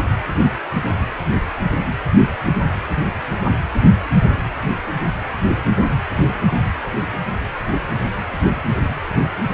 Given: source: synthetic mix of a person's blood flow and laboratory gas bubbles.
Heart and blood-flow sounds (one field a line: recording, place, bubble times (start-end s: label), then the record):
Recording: Doppler ultrasound of blood flow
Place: precordium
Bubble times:
no bubbles
From the record:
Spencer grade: 0 (complete lack of bubble signals)